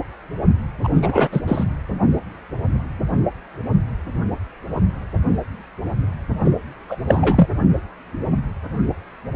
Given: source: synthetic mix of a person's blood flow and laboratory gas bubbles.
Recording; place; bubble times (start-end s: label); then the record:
Doppler ultrasound of blood flow; precordium
0.83-0.89 s: bubbles
0.95-1.28 s: bubbles
1.32-1.41 s: bubbles
1.48-1.64 s: bubbles
6.45-6.52 s: bubbles
6.88-6.97 s: bubbles
7.07-7.46 s: bubbles
From the record:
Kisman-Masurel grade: 223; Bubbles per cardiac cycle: several, 3 to 8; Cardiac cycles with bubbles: 10 to 50%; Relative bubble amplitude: loud (0.450 to 0.775); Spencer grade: 2 (many but less than half of the cardiac periods contain bubble signals, singularly or in groups); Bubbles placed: anywhere in the cardiac cycle